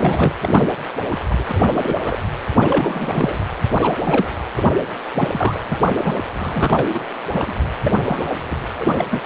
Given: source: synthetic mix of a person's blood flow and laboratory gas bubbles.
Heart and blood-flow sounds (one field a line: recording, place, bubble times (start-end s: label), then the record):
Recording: Doppler ultrasound of blood flow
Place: precordium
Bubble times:
0.00-0.32 s: bubbles
0.41-0.72 s: bubbles
1.10-1.17 s: bubbles
1.31-1.35 s: bubbles
1.38-1.44 s: bubbles
1.49-1.96 s: bubbles
2.04-2.19 s: bubbles
2.58-3.38 s: bubbles
3.77-3.96 s: bubbles
4.04-4.29 s: bubbles
4.55-4.63 s: bubbles
5.13-5.28 s: bubbles
5.33-5.81 s: bubbles
5.86-6.15 s: bubbles
6.38-6.89 s: bubbles
6.93-7.07 s: bubbles
7.29-7.55 s: bubbles
7.62-7.69 s: bubbles
7.83-7.92 s: bubbles
7.96-8.29 s: bubbles
8.33-8.38 s: bubbles
8.50-8.66 s: bubbles
8.73-8.85 s: bubbles
8.96-9.05 s: bubbles
9.10-9.21 s: bubbles
From the record:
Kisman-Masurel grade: 342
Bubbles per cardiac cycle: rolling drumbeat, 9 or more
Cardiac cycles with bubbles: 100%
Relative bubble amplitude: moderate (0.250 to 0.450)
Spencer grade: 3 (all of the cardiac periods contain showers or single bubble signals, but not dominating or overriding the cardiac motion signals)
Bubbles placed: anywhere in the cardiac cycle